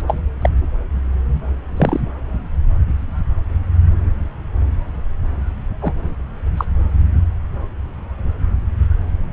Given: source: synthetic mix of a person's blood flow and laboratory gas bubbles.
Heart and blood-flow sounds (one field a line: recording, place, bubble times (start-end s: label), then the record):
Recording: Doppler ultrasound of blood flow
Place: subclavian vein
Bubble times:
0.08-0.20 s: bubbles
0.42-0.49 s: bubbles
1.76-2.00 s: bubbles
5.82-5.93 s: bubbles
6.57-6.65 s: bubbles
From the record:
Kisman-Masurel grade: 123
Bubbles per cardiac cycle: 1 to 2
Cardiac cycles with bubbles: 10 to 50%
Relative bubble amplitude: loud (0.450 to 0.775)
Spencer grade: 2 (many but less than half of the cardiac periods contain bubble signals, singularly or in groups)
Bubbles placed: anywhere in the cardiac cycle